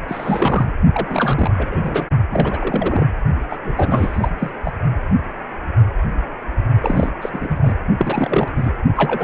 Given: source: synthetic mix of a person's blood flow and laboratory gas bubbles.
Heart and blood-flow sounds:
Doppler ultrasound of blood flow; precordium
0.08-0.73 s: bubbles
0.93-2.06 s: bubbles
2.31-3.06 s: bubbles
3.50-3.56 s: bubbles
3.63-4.30 s: bubbles
4.38-4.50 s: bubbles
4.64-4.72 s: bubbles
6.81-7.11 s: bubbles
7.21-7.29 s: bubbles
7.32-7.74 s: bubbles
7.98-8.48 s: bubbles
8.57-8.71 s: bubbles
8.95-9.24 s: bubbles
From the record:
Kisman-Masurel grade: 332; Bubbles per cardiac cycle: rolling drumbeat, 9 or more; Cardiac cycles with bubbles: 50 to 99%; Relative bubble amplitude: moderate (0.250 to 0.450); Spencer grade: 3 (all of the cardiac periods contain showers or single bubble signals, but not dominating or overriding the cardiac motion signals); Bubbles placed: only in the low amplitude regions of the cardiac cycle

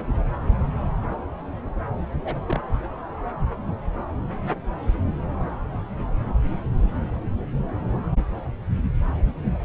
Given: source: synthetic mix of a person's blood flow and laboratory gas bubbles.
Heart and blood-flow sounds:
Doppler ultrasound of blood flow; subclavian vein
2.24-2.40 s: bubbles
2.48-2.60 s: bubbles
From the record:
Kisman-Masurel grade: 121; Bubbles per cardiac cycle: 1 to 2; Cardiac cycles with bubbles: 10 to 50%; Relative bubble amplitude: barely perceptible (0.100 to 0.250); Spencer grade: 2 (many but less than half of the cardiac periods contain bubble signals, singularly or in groups); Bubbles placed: anywhere in the cardiac cycle

